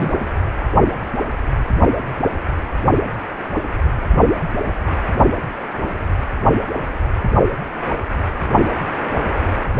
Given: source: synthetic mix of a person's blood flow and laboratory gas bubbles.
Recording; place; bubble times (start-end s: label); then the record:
Doppler ultrasound of blood flow; precordium
0.00-0.27 s: bubbles
From the record:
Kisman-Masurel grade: 212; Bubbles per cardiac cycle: several, 3 to 8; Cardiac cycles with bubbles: 1 to 10%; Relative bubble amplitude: moderate (0.250 to 0.450); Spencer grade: 1 (occasional bubble signal discernible with the cardiac motion signal, with majority of cardiac periods free of bubbles); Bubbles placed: only in the low amplitude regions of the cardiac cycle